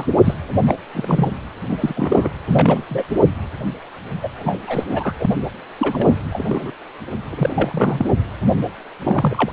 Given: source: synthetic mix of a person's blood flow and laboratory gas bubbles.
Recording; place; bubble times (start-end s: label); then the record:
Doppler ultrasound of blood flow; precordium
0.00-0.05 s: bubbles
0.24-0.34 s: bubbles
0.67-0.74 s: bubbles
0.94-1.28 s: bubbles
1.69-1.77 s: bubbles
1.80-2.29 s: bubbles
2.48-2.83 s: bubbles
2.90-3.05 s: bubbles
4.22-4.29 s: bubbles
4.38-4.59 s: bubbles
4.67-4.84 s: bubbles
4.92-5.14 s: bubbles
5.19-5.26 s: bubbles
5.78-6.17 s: bubbles
6.29-6.71 s: bubbles
7.30-8.06 s: bubbles
8.99-9.52 s: bubbles
From the record:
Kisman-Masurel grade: 242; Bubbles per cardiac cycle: several, 3 to 8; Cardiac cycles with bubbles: 100%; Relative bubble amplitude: moderate (0.250 to 0.450); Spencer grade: 3 (all of the cardiac periods contain showers or single bubble signals, but not dominating or overriding the cardiac motion signals); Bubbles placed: anywhere in the cardiac cycle